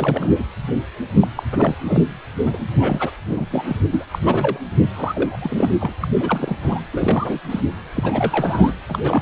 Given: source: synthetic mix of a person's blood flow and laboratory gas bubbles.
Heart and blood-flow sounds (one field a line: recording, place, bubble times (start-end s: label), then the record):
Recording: Doppler ultrasound of blood flow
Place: precordium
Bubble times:
0.00-0.45 s: bubbles
1.21-1.28 s: bubbles
1.36-1.43 s: bubbles
1.52-1.74 s: bubbles
1.84-2.05 s: bubbles
2.43-2.57 s: bubbles
2.72-3.11 s: bubbles
3.25-3.46 s: bubbles
3.50-3.77 s: bubbles
3.84-3.87 s: bubbles
3.90-4.06 s: bubbles
4.11-4.19 s: bubbles
4.21-4.58 s: bubbles
4.81-4.93 s: bubbles
4.96-5.37 s: bubbles
5.41-5.94 s: bubbles
6.00-6.09 s: bubbles
6.17-6.57 s: bubbles
6.62-6.81 s: bubbles
6.93-7.40 s: bubbles
7.50-7.60 s: bubbles
7.95-8.73 s: bubbles
8.88-9.22 s: bubbles
From the record:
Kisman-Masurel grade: 342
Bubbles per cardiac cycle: rolling drumbeat, 9 or more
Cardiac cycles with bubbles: 100%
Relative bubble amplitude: moderate (0.250 to 0.450)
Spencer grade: 3 (all of the cardiac periods contain showers or single bubble signals, but not dominating or overriding the cardiac motion signals)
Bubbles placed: anywhere in the cardiac cycle